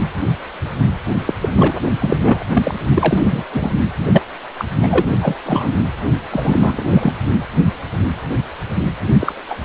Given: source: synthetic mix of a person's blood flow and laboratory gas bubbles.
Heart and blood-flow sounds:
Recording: Doppler ultrasound of blood flow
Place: precordium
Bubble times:
1.26-1.33 s: bubbles
1.41-1.50 s: bubbles
1.54-1.78 s: bubbles
1.99-2.46 s: bubbles
2.54-2.75 s: bubbles
2.94-3.43 s: bubbles
3.52-3.71 s: bubbles
4.05-4.25 s: bubbles
4.57-4.65 s: bubbles
4.83-5.05 s: bubbles
5.22-5.35 s: bubbles
5.45-5.72 s: bubbles
6.31-7.12 s: bubbles
9.19-9.32 s: bubbles
9.49-9.55 s: bubbles
From the record:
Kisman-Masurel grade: 233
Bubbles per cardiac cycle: several, 3 to 8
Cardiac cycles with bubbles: 50 to 99%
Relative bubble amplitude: loud (0.450 to 0.775)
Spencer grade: 3 (all of the cardiac periods contain showers or single bubble signals, but not dominating or overriding the cardiac motion signals)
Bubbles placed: anywhere in the cardiac cycle

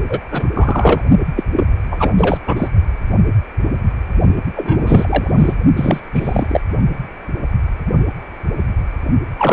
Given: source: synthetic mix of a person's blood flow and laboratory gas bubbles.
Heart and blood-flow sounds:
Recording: Doppler ultrasound of blood flow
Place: precordium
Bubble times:
0.10-0.20 s: bubbles
0.32-1.04 s: bubbles
1.36-1.45 s: bubbles
1.55-1.64 s: bubbles
1.91-2.14 s: bubbles
2.18-2.38 s: bubbles
2.46-2.69 s: bubbles
4.56-5.54 s: bubbles
5.76-6.00 s: bubbles
6.13-6.60 s: bubbles
9.38-9.53 s: bubbles
From the record:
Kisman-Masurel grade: 333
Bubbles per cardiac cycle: rolling drumbeat, 9 or more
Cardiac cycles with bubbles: 50 to 99%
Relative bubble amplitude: loud (0.450 to 0.775)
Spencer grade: 3 (all of the cardiac periods contain showers or single bubble signals, but not dominating or overriding the cardiac motion signals)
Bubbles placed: only in the low amplitude regions of the cardiac cycle

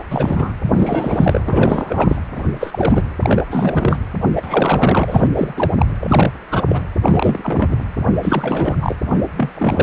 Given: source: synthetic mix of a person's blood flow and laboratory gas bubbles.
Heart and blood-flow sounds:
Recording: Doppler ultrasound of blood flow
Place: precordium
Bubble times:
0.11-0.53 s: bubbles
0.73-1.41 s: bubbles
1.46-2.17 s: bubbles
2.35-2.44 s: bubbles
2.60-3.07 s: bubbles
3.22-3.44 s: bubbles
3.51-3.98 s: bubbles
4.35-5.29 s: bubbles
5.33-5.53 s: bubbles
5.56-5.71 s: bubbles
5.77-5.85 s: bubbles
6.00-6.33 s: bubbles
6.51-6.61 s: bubbles
6.69-6.83 s: bubbles
7.01-7.76 s: bubbles
8.23-8.77 s: bubbles
8.81-8.96 s: bubbles
9.04-9.24 s: bubbles
9.37-9.52 s: bubbles
9.56-9.83 s: bubbles
From the record:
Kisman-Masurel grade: 342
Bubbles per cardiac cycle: rolling drumbeat, 9 or more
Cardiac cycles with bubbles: 100%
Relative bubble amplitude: moderate (0.250 to 0.450)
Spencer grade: 3 (all of the cardiac periods contain showers or single bubble signals, but not dominating or overriding the cardiac motion signals)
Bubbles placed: anywhere in the cardiac cycle

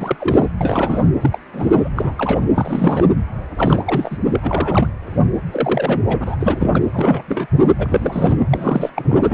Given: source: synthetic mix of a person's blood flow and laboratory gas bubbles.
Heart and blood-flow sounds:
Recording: Doppler ultrasound of blood flow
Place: precordium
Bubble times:
0.00-0.50 s: bubbles
0.60-1.03 s: bubbles
1.21-1.38 s: bubbles
1.53-1.89 s: bubbles
1.95-2.15 s: bubbles
2.18-2.49 s: bubbles
2.54-3.07 s: bubbles
3.58-4.17 s: bubbles
4.25-4.91 s: bubbles
5.51-6.00 s: bubbles
6.07-6.36 s: bubbles
6.40-6.81 s: bubbles
6.92-7.22 s: bubbles
7.28-7.46 s: bubbles
7.79-8.46 s: bubbles
8.52-8.90 s: bubbles
8.96-9.21 s: bubbles
9.26-9.34 s: bubbles
From the record:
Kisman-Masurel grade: 332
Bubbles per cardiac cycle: rolling drumbeat, 9 or more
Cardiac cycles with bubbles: 50 to 99%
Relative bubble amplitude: moderate (0.250 to 0.450)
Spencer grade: 3 (all of the cardiac periods contain showers or single bubble signals, but not dominating or overriding the cardiac motion signals)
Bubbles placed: anywhere in the cardiac cycle

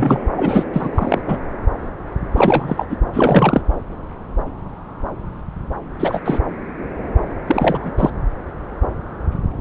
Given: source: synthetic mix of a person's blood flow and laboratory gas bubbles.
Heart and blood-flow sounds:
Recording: Doppler ultrasound of blood flow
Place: subclavian vein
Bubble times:
0.00-0.23 s: bubbles
0.36-0.65 s: bubbles
0.72-0.89 s: bubbles
0.95-1.21 s: bubbles
1.26-1.38 s: bubbles
2.36-2.86 s: bubbles
2.90-2.97 s: bubbles
3.13-3.61 s: bubbles
6.00-6.21 s: bubbles
6.25-6.40 s: bubbles
7.47-7.91 s: bubbles
7.97-8.10 s: bubbles
From the record:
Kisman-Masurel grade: 233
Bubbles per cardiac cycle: several, 3 to 8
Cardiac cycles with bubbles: 50 to 99%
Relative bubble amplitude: loud (0.450 to 0.775)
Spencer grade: 3 (all of the cardiac periods contain showers or single bubble signals, but not dominating or overriding the cardiac motion signals)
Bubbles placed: anywhere in the cardiac cycle

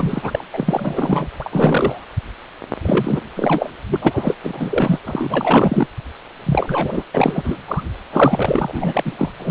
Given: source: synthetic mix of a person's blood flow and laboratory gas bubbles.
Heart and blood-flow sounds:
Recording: Doppler ultrasound of blood flow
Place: precordium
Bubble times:
0.00-0.45 s: bubbles
0.53-1.29 s: bubbles
1.40-2.07 s: bubbles
2.82-3.21 s: bubbles
3.36-3.71 s: bubbles
3.87-3.96 s: bubbles
4.01-4.37 s: bubbles
4.43-4.99 s: bubbles
5.04-5.88 s: bubbles
6.45-7.04 s: bubbles
7.13-7.58 s: bubbles
7.67-7.83 s: bubbles
8.12-9.13 s: bubbles
9.17-9.33 s: bubbles
9.39-9.51 s: bubbles
From the record:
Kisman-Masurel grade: 444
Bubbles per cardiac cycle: continuous sound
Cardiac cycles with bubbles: 100%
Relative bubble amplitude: maximal (0.775 to 0.999)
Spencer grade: 4 (maximum detectable bubble signal sounding continuously throughout systole and diastole of every cardiac period, and overriding the amplitude of the normal cardiac signals)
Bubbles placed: anywhere in the cardiac cycle

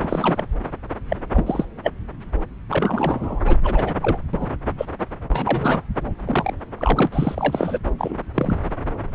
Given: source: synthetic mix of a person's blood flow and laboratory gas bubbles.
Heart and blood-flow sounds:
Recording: Doppler ultrasound of blood flow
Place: subclavian vein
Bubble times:
0.02-0.46 s: bubbles
1.10-1.17 s: bubbles
1.33-1.65 s: bubbles
1.84-1.92 s: bubbles
2.69-3.39 s: bubbles
3.46-3.56 s: bubbles
3.63-3.94 s: bubbles
4.02-4.18 s: bubbles
4.33-4.46 s: bubbles
4.77-4.85 s: bubbles
5.30-5.83 s: bubbles
6.25-6.54 s: bubbles
6.77-7.08 s: bubbles
7.12-7.79 s: bubbles
7.98-8.16 s: bubbles
8.34-8.57 s: bubbles
From the record:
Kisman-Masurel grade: 242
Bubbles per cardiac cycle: several, 3 to 8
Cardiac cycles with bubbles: 100%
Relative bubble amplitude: moderate (0.250 to 0.450)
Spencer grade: 3 (all of the cardiac periods contain showers or single bubble signals, but not dominating or overriding the cardiac motion signals)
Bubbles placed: anywhere in the cardiac cycle

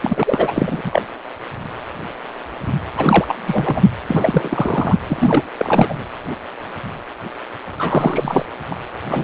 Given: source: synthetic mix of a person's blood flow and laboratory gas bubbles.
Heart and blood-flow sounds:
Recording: Doppler ultrasound of blood flow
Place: precordium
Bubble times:
0.01-1.02 s: bubbles
2.97-3.25 s: bubbles
3.28-3.37 s: bubbles
3.46-3.82 s: bubbles
4.08-4.96 s: bubbles
5.08-5.43 s: bubbles
5.57-5.94 s: bubbles
7.77-8.46 s: bubbles
8.71-8.75 s: bubbles
9.09-9.24 s: bubbles
From the record:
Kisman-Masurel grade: 333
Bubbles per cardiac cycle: rolling drumbeat, 9 or more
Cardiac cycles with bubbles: 50 to 99%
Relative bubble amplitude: loud (0.450 to 0.775)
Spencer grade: 3 (all of the cardiac periods contain showers or single bubble signals, but not dominating or overriding the cardiac motion signals)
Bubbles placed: anywhere in the cardiac cycle

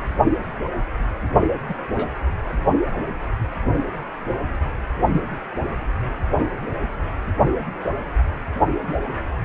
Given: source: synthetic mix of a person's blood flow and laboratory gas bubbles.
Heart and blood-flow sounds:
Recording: Doppler ultrasound of blood flow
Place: precordium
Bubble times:
1.68-1.75 s: bubbles
1.91-2.08 s: bubbles
5.11-5.23 s: bubbles
8.96-9.01 s: bubbles
From the record:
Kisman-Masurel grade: 121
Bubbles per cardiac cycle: 1 to 2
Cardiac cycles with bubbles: 10 to 50%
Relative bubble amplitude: barely perceptible (0.100 to 0.250)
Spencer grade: 2 (many but less than half of the cardiac periods contain bubble signals, singularly or in groups)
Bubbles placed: only in the low amplitude regions of the cardiac cycle

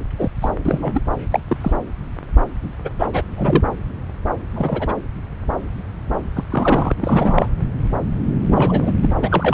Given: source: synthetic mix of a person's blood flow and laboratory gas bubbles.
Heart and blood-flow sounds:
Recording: Doppler ultrasound of blood flow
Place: subclavian vein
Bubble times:
0.18-0.29 s: bubbles
0.41-0.51 s: bubbles
0.65-1.01 s: bubbles
1.31-1.40 s: bubbles
1.48-1.57 s: bubbles
1.61-1.72 s: bubbles
2.84-2.90 s: bubbles
2.98-3.07 s: bubbles
3.13-3.23 s: bubbles
3.36-3.64 s: bubbles
4.55-4.93 s: bubbles
6.34-6.44 s: bubbles
6.50-6.92 s: bubbles
7.01-7.49 s: bubbles
8.47-8.93 s: bubbles
9.02-9.14 s: bubbles
9.22-9.54 s: bubbles
From the record:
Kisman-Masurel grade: 233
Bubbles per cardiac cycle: several, 3 to 8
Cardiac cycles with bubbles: 50 to 99%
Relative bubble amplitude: loud (0.450 to 0.775)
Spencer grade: 3 (all of the cardiac periods contain showers or single bubble signals, but not dominating or overriding the cardiac motion signals)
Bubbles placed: anywhere in the cardiac cycle

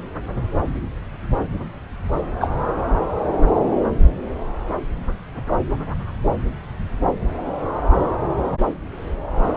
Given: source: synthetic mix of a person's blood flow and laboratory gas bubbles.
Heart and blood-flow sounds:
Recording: Doppler ultrasound of blood flow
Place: subclavian vein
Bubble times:
2.40-2.48 s: bubbles
From the record:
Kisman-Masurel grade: 123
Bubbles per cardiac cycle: 1 to 2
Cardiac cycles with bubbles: 10 to 50%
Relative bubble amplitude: loud (0.450 to 0.775)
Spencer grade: 2 (many but less than half of the cardiac periods contain bubble signals, singularly or in groups)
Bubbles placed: anywhere in the cardiac cycle

